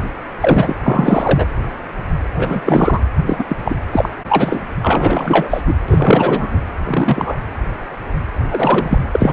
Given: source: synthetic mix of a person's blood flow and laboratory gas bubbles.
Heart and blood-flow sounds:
Doppler ultrasound of blood flow; precordium
0.41-0.75 s: bubbles
0.83-1.47 s: bubbles
2.38-2.62 s: bubbles
2.66-3.00 s: bubbles
3.26-3.44 s: bubbles
3.47-3.56 s: bubbles
3.64-3.75 s: bubbles
3.92-4.09 s: bubbles
4.29-4.59 s: bubbles
4.83-5.61 s: bubbles
5.67-5.73 s: bubbles
5.88-6.58 s: bubbles
6.83-7.38 s: bubbles
8.51-8.99 s: bubbles
9.12-9.33 s: bubbles
From the record:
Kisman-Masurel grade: 233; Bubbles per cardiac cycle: several, 3 to 8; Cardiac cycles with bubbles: 50 to 99%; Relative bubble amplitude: loud (0.450 to 0.775); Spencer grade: 3 (all of the cardiac periods contain showers or single bubble signals, but not dominating or overriding the cardiac motion signals); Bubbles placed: anywhere in the cardiac cycle

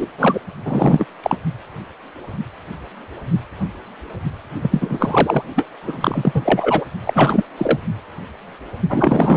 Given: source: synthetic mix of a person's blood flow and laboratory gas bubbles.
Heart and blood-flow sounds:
Doppler ultrasound of blood flow; precordium
0.00-0.07 s: bubbles
0.18-0.40 s: bubbles
0.65-1.05 s: bubbles
1.23-1.38 s: bubbles
4.62-5.45 s: bubbles
5.55-5.67 s: bubbles
5.82-6.85 s: bubbles
7.04-7.45 s: bubbles
7.58-7.78 s: bubbles
8.90-9.37 s: bubbles
From the record:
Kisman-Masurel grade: 333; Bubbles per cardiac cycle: rolling drumbeat, 9 or more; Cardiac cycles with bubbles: 50 to 99%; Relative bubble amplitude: loud (0.450 to 0.775); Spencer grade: 3 (all of the cardiac periods contain showers or single bubble signals, but not dominating or overriding the cardiac motion signals); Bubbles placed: only in the low amplitude regions of the cardiac cycle

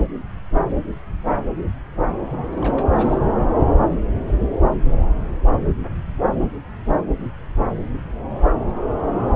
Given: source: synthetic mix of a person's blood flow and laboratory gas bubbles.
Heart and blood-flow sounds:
Doppler ultrasound of blood flow; subclavian vein
2.52-2.90 s: bubbles
2.96-3.17 s: bubbles
From the record:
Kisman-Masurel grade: 211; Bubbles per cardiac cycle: several, 3 to 8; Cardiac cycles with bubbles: 1 to 10%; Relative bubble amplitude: barely perceptible (0.100 to 0.250); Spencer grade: 1 (occasional bubble signal discernible with the cardiac motion signal, with majority of cardiac periods free of bubbles); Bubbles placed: anywhere in the cardiac cycle

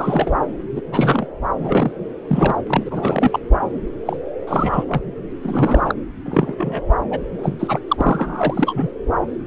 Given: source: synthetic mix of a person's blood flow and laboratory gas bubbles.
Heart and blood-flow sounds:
Doppler ultrasound of blood flow; subclavian vein
0.00-0.32 s: bubbles
0.76-0.81 s: bubbles
0.91-1.27 s: bubbles
1.58-1.91 s: bubbles
2.27-2.58 s: bubbles
2.67-3.40 s: bubbles
4.05-4.17 s: bubbles
4.47-4.84 s: bubbles
4.88-5.02 s: bubbles
5.41-5.95 s: bubbles
6.25-6.83 s: bubbles
7.10-7.19 s: bubbles
7.38-7.56 s: bubbles
7.59-7.79 s: bubbles
7.88-8.90 s: bubbles
From the record:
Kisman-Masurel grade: 342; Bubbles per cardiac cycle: rolling drumbeat, 9 or more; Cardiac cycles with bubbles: 100%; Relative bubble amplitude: moderate (0.250 to 0.450); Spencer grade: 3 (all of the cardiac periods contain showers or single bubble signals, but not dominating or overriding the cardiac motion signals); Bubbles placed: anywhere in the cardiac cycle

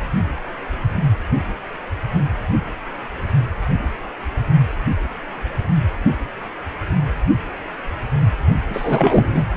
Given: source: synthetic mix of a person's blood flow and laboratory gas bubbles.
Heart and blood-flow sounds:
Doppler ultrasound of blood flow; precordium
8.68-9.48 s: bubbles
From the record:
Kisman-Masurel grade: 213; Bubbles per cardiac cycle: several, 3 to 8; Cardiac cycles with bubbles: 1 to 10%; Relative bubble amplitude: loud (0.450 to 0.775); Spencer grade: 1 (occasional bubble signal discernible with the cardiac motion signal, with majority of cardiac periods free of bubbles); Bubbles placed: anywhere in the cardiac cycle

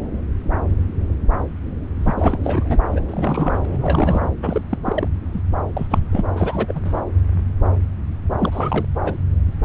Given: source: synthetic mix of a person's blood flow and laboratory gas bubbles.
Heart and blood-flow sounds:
Doppler ultrasound of blood flow; subclavian vein
1.95-2.77 s: bubbles
2.92-3.01 s: bubbles
3.08-3.59 s: bubbles
3.64-3.66 s: bubbles
3.71-4.29 s: bubbles
4.42-4.61 s: bubbles
4.69-4.78 s: bubbles
4.85-5.08 s: bubbles
5.33-5.42 s: bubbles
5.75-5.87 s: bubbles
5.90-6.00 s: bubbles
6.12-6.21 s: bubbles
6.36-7.01 s: bubbles
8.38-8.85 s: bubbles
9.04-9.13 s: bubbles
From the record:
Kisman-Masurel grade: 332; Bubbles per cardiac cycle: rolling drumbeat, 9 or more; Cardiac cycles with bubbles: 50 to 99%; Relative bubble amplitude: moderate (0.250 to 0.450); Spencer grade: 3 (all of the cardiac periods contain showers or single bubble signals, but not dominating or overriding the cardiac motion signals); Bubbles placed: anywhere in the cardiac cycle

